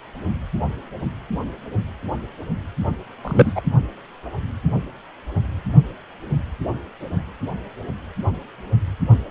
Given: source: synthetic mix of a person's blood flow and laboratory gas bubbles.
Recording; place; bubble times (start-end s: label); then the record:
Doppler ultrasound of blood flow; precordium
3.24-3.53 s: bubbles
3.55-3.61 s: bubbles
From the record:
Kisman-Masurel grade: 123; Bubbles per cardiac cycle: 1 to 2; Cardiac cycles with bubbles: 10 to 50%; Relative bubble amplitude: loud (0.450 to 0.775); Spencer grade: 2 (many but less than half of the cardiac periods contain bubble signals, singularly or in groups); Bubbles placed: only in the low amplitude regions of the cardiac cycle